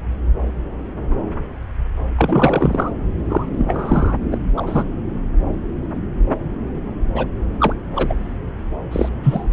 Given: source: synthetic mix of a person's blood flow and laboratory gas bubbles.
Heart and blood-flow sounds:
Doppler ultrasound of blood flow; subclavian vein
2.17-2.92 s: bubbles
3.29-4.17 s: bubbles
4.31-4.37 s: bubbles
4.57-4.85 s: bubbles
7.16-7.27 s: bubbles
7.59-7.74 s: bubbles
7.96-8.14 s: bubbles
8.91-9.09 s: bubbles
9.23-9.46 s: bubbles
From the record:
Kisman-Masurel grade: 223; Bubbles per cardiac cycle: several, 3 to 8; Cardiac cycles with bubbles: 10 to 50%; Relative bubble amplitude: loud (0.450 to 0.775); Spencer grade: 2 (many but less than half of the cardiac periods contain bubble signals, singularly or in groups); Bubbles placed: anywhere in the cardiac cycle

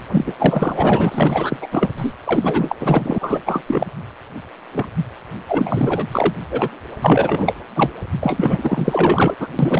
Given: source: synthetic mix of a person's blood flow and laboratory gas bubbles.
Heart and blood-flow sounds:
Doppler ultrasound of blood flow; precordium
0.11-0.33 s: bubbles
0.38-1.57 s: bubbles
1.60-1.67 s: bubbles
1.71-1.89 s: bubbles
1.97-2.14 s: bubbles
2.26-2.76 s: bubbles
2.80-3.40 s: bubbles
3.46-3.63 s: bubbles
3.67-3.87 s: bubbles
4.72-4.86 s: bubbles
5.48-6.05 s: bubbles
6.11-6.33 s: bubbles
6.50-6.69 s: bubbles
7.01-7.53 s: bubbles
7.75-7.90 s: bubbles
8.21-9.36 s: bubbles
9.40-9.48 s: bubbles
9.59-9.80 s: bubbles
From the record:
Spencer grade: 4 (maximum detectable bubble signal sounding continuously throughout systole and diastole of every cardiac period, and overriding the amplitude of the normal cardiac signals); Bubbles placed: anywhere in the cardiac cycle

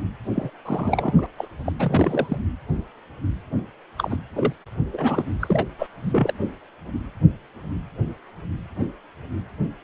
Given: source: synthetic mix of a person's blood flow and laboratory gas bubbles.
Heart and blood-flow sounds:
Doppler ultrasound of blood flow; precordium
0.35-0.51 s: bubbles
0.65-1.26 s: bubbles
1.38-1.48 s: bubbles
1.66-1.72 s: bubbles
1.78-2.38 s: bubbles
3.97-4.17 s: bubbles
4.35-4.53 s: bubbles
4.92-5.26 s: bubbles
5.39-5.67 s: bubbles
5.79-5.87 s: bubbles
6.03-6.33 s: bubbles
From the record:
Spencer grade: 3 (all of the cardiac periods contain showers or single bubble signals, but not dominating or overriding the cardiac motion signals); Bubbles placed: anywhere in the cardiac cycle

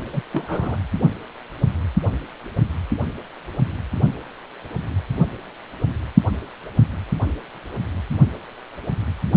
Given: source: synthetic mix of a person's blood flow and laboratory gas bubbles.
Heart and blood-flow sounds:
Doppler ultrasound of blood flow; precordium
0.12-0.22 s: bubbles
0.32-0.76 s: bubbles
From the record:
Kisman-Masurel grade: 212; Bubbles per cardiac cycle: several, 3 to 8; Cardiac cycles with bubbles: 1 to 10%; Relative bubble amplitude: moderate (0.250 to 0.450); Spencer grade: 1 (occasional bubble signal discernible with the cardiac motion signal, with majority of cardiac periods free of bubbles); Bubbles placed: only in the low amplitude regions of the cardiac cycle

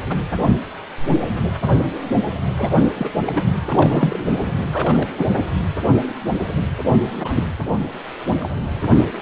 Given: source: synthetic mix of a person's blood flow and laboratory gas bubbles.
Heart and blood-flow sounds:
Doppler ultrasound of blood flow; precordium
0.09-0.16 s: bubbles
2.56-2.81 s: bubbles
2.94-3.09 s: bubbles
3.24-3.44 s: bubbles
3.67-4.24 s: bubbles
4.70-5.09 s: bubbles
5.17-5.27 s: bubbles
7.20-7.44 s: bubbles
8.39-8.51 s: bubbles
8.77-8.88 s: bubbles
From the record:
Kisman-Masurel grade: 232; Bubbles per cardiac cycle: several, 3 to 8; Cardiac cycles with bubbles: 50 to 99%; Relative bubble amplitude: moderate (0.250 to 0.450); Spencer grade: 3 (all of the cardiac periods contain showers or single bubble signals, but not dominating or overriding the cardiac motion signals); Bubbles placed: anywhere in the cardiac cycle

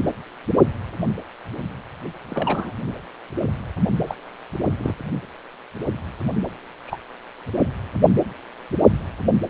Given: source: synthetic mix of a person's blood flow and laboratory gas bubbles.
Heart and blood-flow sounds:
Doppler ultrasound of blood flow; precordium
2.30-2.73 s: bubbles
4.07-4.15 s: bubbles
4.77-4.95 s: bubbles
6.87-6.98 s: bubbles
From the record:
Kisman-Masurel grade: 122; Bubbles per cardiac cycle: 1 to 2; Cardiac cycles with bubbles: 10 to 50%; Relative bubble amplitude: moderate (0.250 to 0.450); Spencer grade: 2 (many but less than half of the cardiac periods contain bubble signals, singularly or in groups); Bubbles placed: only in the low amplitude regions of the cardiac cycle

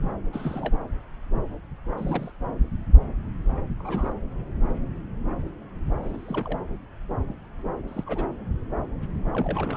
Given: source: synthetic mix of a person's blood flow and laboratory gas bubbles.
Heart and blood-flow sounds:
Doppler ultrasound of blood flow; subclavian vein
0.00-0.09 s: bubbles
0.33-0.73 s: bubbles
1.98-2.32 s: bubbles
3.80-4.13 s: bubbles
6.02-6.57 s: bubbles
7.88-8.30 s: bubbles
9.33-9.76 s: bubbles
From the record:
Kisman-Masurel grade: 221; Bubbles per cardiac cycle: several, 3 to 8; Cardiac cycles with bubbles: 10 to 50%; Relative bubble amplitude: barely perceptible (0.100 to 0.250); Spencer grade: 2 (many but less than half of the cardiac periods contain bubble signals, singularly or in groups); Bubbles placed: anywhere in the cardiac cycle

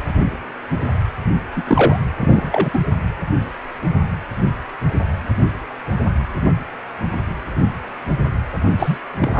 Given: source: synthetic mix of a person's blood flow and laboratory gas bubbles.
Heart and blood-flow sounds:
Doppler ultrasound of blood flow; precordium
1.56-1.63 s: bubbles
1.67-2.00 s: bubbles
2.20-2.70 s: bubbles
2.73-2.79 s: bubbles
8.78-8.98 s: bubbles
9.18-9.40 s: bubbles
From the record:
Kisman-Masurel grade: 223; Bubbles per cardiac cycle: several, 3 to 8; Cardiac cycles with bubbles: 10 to 50%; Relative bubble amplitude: loud (0.450 to 0.775); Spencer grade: 2 (many but less than half of the cardiac periods contain bubble signals, singularly or in groups); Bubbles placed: only in the low amplitude regions of the cardiac cycle

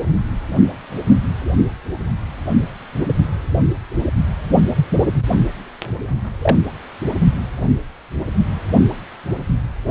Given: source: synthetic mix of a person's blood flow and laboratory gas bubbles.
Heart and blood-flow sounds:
Doppler ultrasound of blood flow; precordium
6.42-6.58 s: bubbles
From the record:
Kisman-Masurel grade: 123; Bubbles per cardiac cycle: 1 to 2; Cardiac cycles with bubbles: 10 to 50%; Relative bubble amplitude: loud (0.450 to 0.775); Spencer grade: 2 (many but less than half of the cardiac periods contain bubble signals, singularly or in groups); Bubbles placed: only in the low amplitude regions of the cardiac cycle

